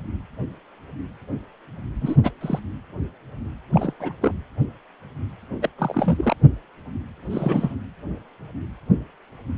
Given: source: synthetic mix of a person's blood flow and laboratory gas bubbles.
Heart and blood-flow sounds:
Doppler ultrasound of blood flow; precordium
2.00-2.16 s: bubbles
2.24-2.31 s: bubbles
2.41-2.59 s: bubbles
3.73-3.94 s: bubbles
4.00-4.13 s: bubbles
4.21-4.34 s: bubbles
5.62-5.69 s: bubbles
5.78-6.35 s: bubbles
7.30-7.75 s: bubbles
From the record:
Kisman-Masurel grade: 232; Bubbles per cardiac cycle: several, 3 to 8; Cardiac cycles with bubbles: 50 to 99%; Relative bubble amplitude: moderate (0.250 to 0.450); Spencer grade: 3 (all of the cardiac periods contain showers or single bubble signals, but not dominating or overriding the cardiac motion signals); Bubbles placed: anywhere in the cardiac cycle

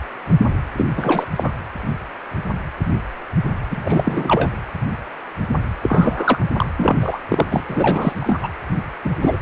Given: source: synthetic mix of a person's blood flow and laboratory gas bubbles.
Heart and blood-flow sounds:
Doppler ultrasound of blood flow; precordium
0.76-0.89 s: bubbles
0.96-1.26 s: bubbles
1.36-1.50 s: bubbles
3.71-4.56 s: bubbles
5.82-6.45 s: bubbles
6.56-6.66 s: bubbles
6.77-7.20 s: bubbles
7.29-7.45 s: bubbles
7.49-7.64 s: bubbles
7.68-8.49 s: bubbles
9.04-9.37 s: bubbles
From the record:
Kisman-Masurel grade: 333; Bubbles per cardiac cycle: rolling drumbeat, 9 or more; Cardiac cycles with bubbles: 50 to 99%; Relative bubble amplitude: loud (0.450 to 0.775); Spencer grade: 3 (all of the cardiac periods contain showers or single bubble signals, but not dominating or overriding the cardiac motion signals); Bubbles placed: anywhere in the cardiac cycle

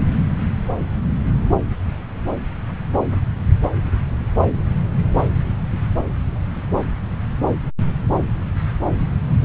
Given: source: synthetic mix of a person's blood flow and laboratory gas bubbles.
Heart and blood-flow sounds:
Doppler ultrasound of blood flow; subclavian vein
9.39-9.45 s: bubbles
From the record:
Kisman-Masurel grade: 211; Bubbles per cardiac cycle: several, 3 to 8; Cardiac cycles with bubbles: 1 to 10%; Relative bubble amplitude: barely perceptible (0.100 to 0.250); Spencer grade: 1 (occasional bubble signal discernible with the cardiac motion signal, with majority of cardiac periods free of bubbles); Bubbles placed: anywhere in the cardiac cycle

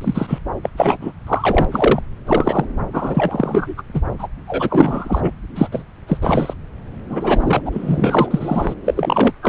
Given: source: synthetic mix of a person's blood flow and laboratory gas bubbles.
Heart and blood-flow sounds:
Doppler ultrasound of blood flow; subclavian vein
0.01-0.39 s: bubbles
0.62-0.69 s: bubbles
0.77-0.97 s: bubbles
1.01-1.12 s: bubbles
1.27-1.65 s: bubbles
1.71-2.01 s: bubbles
2.26-2.65 s: bubbles
2.92-3.73 s: bubbles
3.77-3.82 s: bubbles
3.94-4.02 s: bubbles
4.19-4.28 s: bubbles
4.48-5.31 s: bubbles
5.55-5.69 s: bubbles
5.72-5.83 s: bubbles
6.08-6.19 s: bubbles
6.22-6.54 s: bubbles
7.10-7.62 s: bubbles
7.65-8.75 s: bubbles
8.85-9.33 s: bubbles
9.42-9.49 s: bubbles
From the record:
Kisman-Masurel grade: 343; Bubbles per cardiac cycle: rolling drumbeat, 9 or more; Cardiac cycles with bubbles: 100%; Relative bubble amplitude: loud (0.450 to 0.775); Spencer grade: 3 (all of the cardiac periods contain showers or single bubble signals, but not dominating or overriding the cardiac motion signals); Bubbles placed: anywhere in the cardiac cycle

